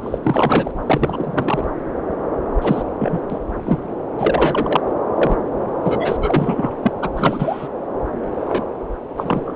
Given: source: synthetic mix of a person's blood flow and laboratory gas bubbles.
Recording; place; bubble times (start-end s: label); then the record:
Doppler ultrasound of blood flow; subclavian vein
0.03-0.18 s: bubbles
0.22-0.71 s: bubbles
0.86-1.65 s: bubbles
2.61-2.82 s: bubbles
2.98-3.21 s: bubbles
3.29-3.38 s: bubbles
3.65-3.79 s: bubbles
4.18-4.93 s: bubbles
5.16-5.37 s: bubbles
5.83-6.17 s: bubbles
6.20-6.75 s: bubbles
6.83-6.92 s: bubbles
7.01-7.09 s: bubbles
7.16-7.68 s: bubbles
8.41-8.64 s: bubbles
9.17-9.56 s: bubbles
From the record:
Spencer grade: 3 (all of the cardiac periods contain showers or single bubble signals, but not dominating or overriding the cardiac motion signals); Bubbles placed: anywhere in the cardiac cycle